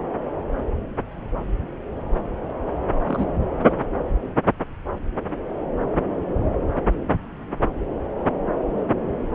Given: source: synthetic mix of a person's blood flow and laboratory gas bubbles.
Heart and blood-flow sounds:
Doppler ultrasound of blood flow; subclavian vein
3.06-3.27 s: bubbles
From the record:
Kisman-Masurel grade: 111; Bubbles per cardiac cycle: 1 to 2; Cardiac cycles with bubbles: 1 to 10%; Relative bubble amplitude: barely perceptible (0.100 to 0.250); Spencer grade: 1 (occasional bubble signal discernible with the cardiac motion signal, with majority of cardiac periods free of bubbles); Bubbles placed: anywhere in the cardiac cycle

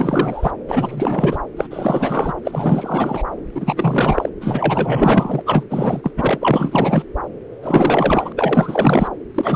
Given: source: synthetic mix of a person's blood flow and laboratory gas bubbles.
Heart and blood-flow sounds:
Doppler ultrasound of blood flow; subclavian vein
0.00-0.51 s: bubbles
0.68-1.39 s: bubbles
1.56-1.68 s: bubbles
1.70-2.33 s: bubbles
2.45-3.23 s: bubbles
3.55-4.29 s: bubbles
4.41-5.42 s: bubbles
5.46-5.63 s: bubbles
5.70-6.11 s: bubbles
6.16-7.05 s: bubbles
7.62-8.32 s: bubbles
8.37-9.08 s: bubbles
9.34-9.56 s: bubbles
From the record:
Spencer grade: 4 (maximum detectable bubble signal sounding continuously throughout systole and diastole of every cardiac period, and overriding the amplitude of the normal cardiac signals); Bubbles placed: anywhere in the cardiac cycle

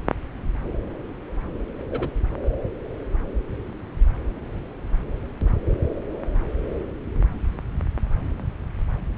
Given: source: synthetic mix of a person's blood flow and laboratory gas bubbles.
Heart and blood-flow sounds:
Doppler ultrasound of blood flow; subclavian vein
1.90-2.09 s: bubbles
From the record:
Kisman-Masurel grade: 111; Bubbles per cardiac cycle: 1 to 2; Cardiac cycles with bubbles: 1 to 10%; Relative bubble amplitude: barely perceptible (0.100 to 0.250); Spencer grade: 1 (occasional bubble signal discernible with the cardiac motion signal, with majority of cardiac periods free of bubbles); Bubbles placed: anywhere in the cardiac cycle

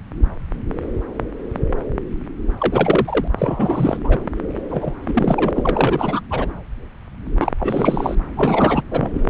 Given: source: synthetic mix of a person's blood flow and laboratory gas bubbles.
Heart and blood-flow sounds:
Doppler ultrasound of blood flow; subclavian vein
2.58-3.28 s: bubbles
3.38-3.99 s: bubbles
4.04-4.18 s: bubbles
4.71-4.93 s: bubbles
5.08-5.51 s: bubbles
5.55-6.20 s: bubbles
6.30-6.47 s: bubbles
7.40-7.52 s: bubbles
7.59-8.15 s: bubbles
8.37-8.83 s: bubbles
8.91-9.30 s: bubbles
From the record:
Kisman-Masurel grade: 332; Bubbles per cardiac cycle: rolling drumbeat, 9 or more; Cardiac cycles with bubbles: 50 to 99%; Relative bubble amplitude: moderate (0.250 to 0.450); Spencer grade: 3 (all of the cardiac periods contain showers or single bubble signals, but not dominating or overriding the cardiac motion signals); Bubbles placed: anywhere in the cardiac cycle

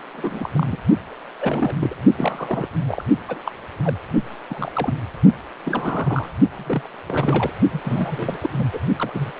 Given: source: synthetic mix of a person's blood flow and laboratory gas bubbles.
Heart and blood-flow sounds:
Doppler ultrasound of blood flow; precordium
0.13-0.49 s: bubbles
0.54-0.76 s: bubbles
1.40-1.75 s: bubbles
1.79-1.96 s: bubbles
2.17-2.67 s: bubbles
2.88-3.04 s: bubbles
3.28-3.39 s: bubbles
3.46-3.52 s: bubbles
3.83-3.97 s: bubbles
4.49-4.93 s: bubbles
5.64-6.32 s: bubbles
6.53-6.89 s: bubbles
7.06-7.53 s: bubbles
7.72-7.80 s: bubbles
7.84-8.38 s: bubbles
8.41-8.50 s: bubbles
8.57-8.66 s: bubbles
8.73-8.80 s: bubbles
8.98-9.32 s: bubbles
From the record:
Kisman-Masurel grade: 242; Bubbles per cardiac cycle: several, 3 to 8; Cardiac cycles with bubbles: 100%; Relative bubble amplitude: moderate (0.250 to 0.450); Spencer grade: 3 (all of the cardiac periods contain showers or single bubble signals, but not dominating or overriding the cardiac motion signals); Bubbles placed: only in the low amplitude regions of the cardiac cycle

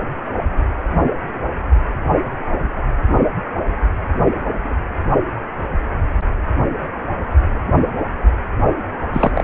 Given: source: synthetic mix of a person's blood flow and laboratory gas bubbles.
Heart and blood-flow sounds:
Doppler ultrasound of blood flow; precordium
9.12-9.44 s: bubbles
From the record:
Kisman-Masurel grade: 213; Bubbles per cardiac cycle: several, 3 to 8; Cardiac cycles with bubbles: 1 to 10%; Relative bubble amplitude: loud (0.450 to 0.775); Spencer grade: 1 (occasional bubble signal discernible with the cardiac motion signal, with majority of cardiac periods free of bubbles); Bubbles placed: only in the low amplitude regions of the cardiac cycle

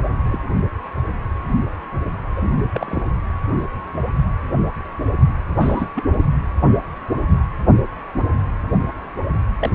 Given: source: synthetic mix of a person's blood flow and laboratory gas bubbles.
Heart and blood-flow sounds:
Doppler ultrasound of blood flow; precordium
0.26-0.45 s: bubbles
2.36-2.50 s: bubbles
2.73-3.04 s: bubbles
5.60-5.88 s: bubbles
5.96-6.04 s: bubbles
6.11-6.24 s: bubbles
9.61-9.70 s: bubbles
From the record:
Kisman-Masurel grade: 222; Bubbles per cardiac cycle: several, 3 to 8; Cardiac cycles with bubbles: 10 to 50%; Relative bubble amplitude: moderate (0.250 to 0.450); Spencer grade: 2 (many but less than half of the cardiac periods contain bubble signals, singularly or in groups); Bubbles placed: anywhere in the cardiac cycle

